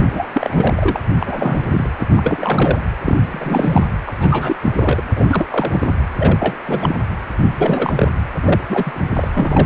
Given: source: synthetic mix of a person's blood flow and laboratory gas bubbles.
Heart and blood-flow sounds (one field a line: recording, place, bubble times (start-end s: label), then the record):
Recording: Doppler ultrasound of blood flow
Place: precordium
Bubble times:
0.00-0.26 s: bubbles
0.33-1.01 s: bubbles
1.19-1.88 s: bubbles
1.99-2.07 s: bubbles
2.13-2.81 s: bubbles
3.04-3.17 s: bubbles
3.30-3.86 s: bubbles
4.06-4.13 s: bubbles
4.18-4.56 s: bubbles
4.62-4.72 s: bubbles
4.76-5.00 s: bubbles
5.16-5.24 s: bubbles
5.27-5.46 s: bubbles
5.51-5.94 s: bubbles
6.18-6.56 s: bubbles
6.63-6.96 s: bubbles
7.57-8.08 s: bubbles
8.41-8.61 s: bubbles
8.69-9.04 s: bubbles
9.15-9.28 s: bubbles
9.34-9.65 s: bubbles
From the record:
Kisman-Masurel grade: 342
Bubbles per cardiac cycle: rolling drumbeat, 9 or more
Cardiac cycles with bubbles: 100%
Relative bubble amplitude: moderate (0.250 to 0.450)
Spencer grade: 3 (all of the cardiac periods contain showers or single bubble signals, but not dominating or overriding the cardiac motion signals)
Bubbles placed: anywhere in the cardiac cycle